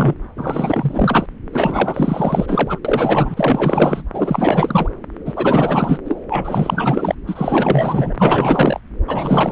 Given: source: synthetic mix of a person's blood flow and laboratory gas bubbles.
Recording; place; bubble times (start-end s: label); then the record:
Doppler ultrasound of blood flow; subclavian vein
0.00-0.14 s: bubbles
0.36-1.26 s: bubbles
1.52-2.79 s: bubbles
2.85-4.02 s: bubbles
4.13-4.89 s: bubbles
5.26-5.98 s: bubbles
6.05-6.21 s: bubbles
6.29-7.15 s: bubbles
7.27-8.80 s: bubbles
9.07-9.52 s: bubbles
From the record:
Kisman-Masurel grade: 444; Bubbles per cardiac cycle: continuous sound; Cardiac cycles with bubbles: 100%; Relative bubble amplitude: maximal (0.775 to 0.999); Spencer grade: 4 (maximum detectable bubble signal sounding continuously throughout systole and diastole of every cardiac period, and overriding the amplitude of the normal cardiac signals); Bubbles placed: anywhere in the cardiac cycle